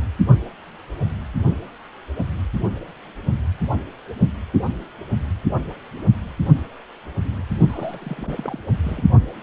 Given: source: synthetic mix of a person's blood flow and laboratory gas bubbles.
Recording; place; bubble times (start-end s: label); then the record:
Doppler ultrasound of blood flow; precordium
7.67-8.59 s: bubbles
8.83-9.04 s: bubbles
From the record:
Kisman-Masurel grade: 211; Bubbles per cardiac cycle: several, 3 to 8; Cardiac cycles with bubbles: 1 to 10%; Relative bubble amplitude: barely perceptible (0.100 to 0.250); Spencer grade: 1 (occasional bubble signal discernible with the cardiac motion signal, with majority of cardiac periods free of bubbles); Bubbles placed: only in the low amplitude regions of the cardiac cycle